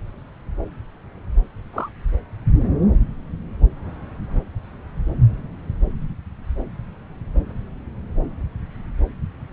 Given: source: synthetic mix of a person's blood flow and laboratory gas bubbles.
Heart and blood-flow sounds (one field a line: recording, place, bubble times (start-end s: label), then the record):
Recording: Doppler ultrasound of blood flow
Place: subclavian vein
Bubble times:
1.73-1.89 s: bubbles
From the record:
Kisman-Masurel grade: 112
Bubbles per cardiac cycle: 1 to 2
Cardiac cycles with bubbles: 1 to 10%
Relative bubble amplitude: moderate (0.250 to 0.450)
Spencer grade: 1 (occasional bubble signal discernible with the cardiac motion signal, with majority of cardiac periods free of bubbles)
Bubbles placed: anywhere in the cardiac cycle